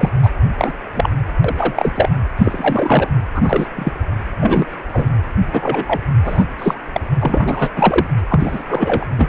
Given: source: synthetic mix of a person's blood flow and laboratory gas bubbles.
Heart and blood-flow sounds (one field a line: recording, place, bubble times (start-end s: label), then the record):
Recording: Doppler ultrasound of blood flow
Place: precordium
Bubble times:
0.00-0.09 s: bubbles
0.22-0.30 s: bubbles
0.58-0.73 s: bubbles
0.94-1.10 s: bubbles
1.44-1.92 s: bubbles
1.95-2.09 s: bubbles
2.38-3.11 s: bubbles
3.34-3.67 s: bubbles
3.76-3.91 s: bubbles
4.38-4.80 s: bubbles
4.92-5.09 s: bubbles
5.53-6.01 s: bubbles
6.24-6.44 s: bubbles
6.58-6.75 s: bubbles
6.92-7.00 s: bubbles
7.19-7.69 s: bubbles
7.75-8.06 s: bubbles
8.29-8.62 s: bubbles
8.68-9.05 s: bubbles
9.18-9.28 s: bubbles
From the record:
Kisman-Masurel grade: 243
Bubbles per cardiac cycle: several, 3 to 8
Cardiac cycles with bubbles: 100%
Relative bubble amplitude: loud (0.450 to 0.775)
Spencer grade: 3 (all of the cardiac periods contain showers or single bubble signals, but not dominating or overriding the cardiac motion signals)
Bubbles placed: anywhere in the cardiac cycle